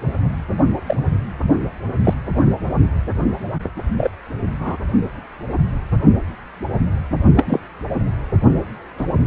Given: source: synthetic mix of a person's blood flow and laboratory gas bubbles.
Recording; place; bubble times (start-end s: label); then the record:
Doppler ultrasound of blood flow; precordium
0.86-0.96 s: bubbles
2.04-2.13 s: bubbles
3.97-4.10 s: bubbles
4.60-4.77 s: bubbles
7.36-7.59 s: bubbles
8.97-9.06 s: bubbles
From the record:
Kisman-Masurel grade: 123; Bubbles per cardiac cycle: 1 to 2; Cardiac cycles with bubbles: 10 to 50%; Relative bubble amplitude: loud (0.450 to 0.775); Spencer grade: 2 (many but less than half of the cardiac periods contain bubble signals, singularly or in groups); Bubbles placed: only in the low amplitude regions of the cardiac cycle